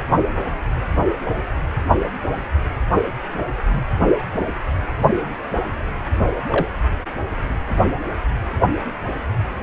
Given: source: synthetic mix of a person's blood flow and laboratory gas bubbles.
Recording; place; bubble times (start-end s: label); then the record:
Doppler ultrasound of blood flow; precordium
6.50-6.68 s: bubbles
From the record:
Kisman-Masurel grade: 112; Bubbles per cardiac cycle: 1 to 2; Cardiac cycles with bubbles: 1 to 10%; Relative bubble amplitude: moderate (0.250 to 0.450); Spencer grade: 1 (occasional bubble signal discernible with the cardiac motion signal, with majority of cardiac periods free of bubbles); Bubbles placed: only in the low amplitude regions of the cardiac cycle